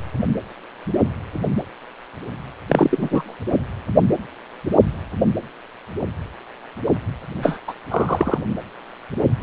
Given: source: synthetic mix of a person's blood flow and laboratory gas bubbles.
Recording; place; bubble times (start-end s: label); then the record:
Doppler ultrasound of blood flow; precordium
2.68-3.34 s: bubbles
7.42-7.58 s: bubbles
7.67-7.74 s: bubbles
7.91-8.38 s: bubbles
From the record:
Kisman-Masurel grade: 223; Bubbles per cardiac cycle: several, 3 to 8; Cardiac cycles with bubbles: 10 to 50%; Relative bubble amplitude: loud (0.450 to 0.775); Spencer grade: 2 (many but less than half of the cardiac periods contain bubble signals, singularly or in groups); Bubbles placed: anywhere in the cardiac cycle